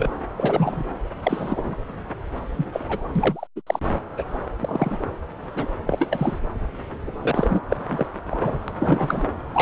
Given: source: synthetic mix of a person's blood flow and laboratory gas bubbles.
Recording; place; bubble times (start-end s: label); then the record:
Doppler ultrasound of blood flow; subclavian vein
0.00-0.11 s: bubbles
0.36-0.84 s: bubbles
1.23-1.76 s: bubbles
2.56-2.66 s: bubbles
2.72-3.08 s: bubbles
3.15-3.47 s: bubbles
3.56-3.61 s: bubbles
3.67-3.79 s: bubbles
4.17-4.24 s: bubbles
4.60-4.98 s: bubbles
5.56-5.66 s: bubbles
5.86-6.39 s: bubbles
7.22-7.61 s: bubbles
7.69-7.77 s: bubbles
7.90-8.06 s: bubbles
8.30-8.57 s: bubbles
8.68-8.71 s: bubbles
8.79-9.26 s: bubbles
9.53-9.62 s: bubbles
From the record:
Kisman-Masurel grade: 243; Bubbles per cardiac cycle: several, 3 to 8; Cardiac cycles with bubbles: 100%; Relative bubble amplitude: loud (0.450 to 0.775); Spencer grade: 3 (all of the cardiac periods contain showers or single bubble signals, but not dominating or overriding the cardiac motion signals); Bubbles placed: anywhere in the cardiac cycle